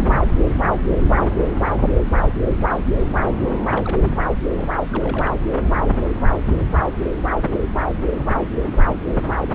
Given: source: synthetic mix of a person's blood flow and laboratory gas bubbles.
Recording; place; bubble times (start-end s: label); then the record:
Doppler ultrasound of blood flow; subclavian vein
0.00-0.25 s: bubbles
3.66-4.05 s: bubbles
4.16-4.25 s: bubbles
4.57-4.70 s: bubbles
4.92-5.37 s: bubbles
9.07-9.22 s: bubbles
9.47-9.52 s: bubbles
From the record:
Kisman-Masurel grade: 121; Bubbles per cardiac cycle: 1 to 2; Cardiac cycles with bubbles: 10 to 50%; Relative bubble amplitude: barely perceptible (0.100 to 0.250); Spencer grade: 2 (many but less than half of the cardiac periods contain bubble signals, singularly or in groups); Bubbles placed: anywhere in the cardiac cycle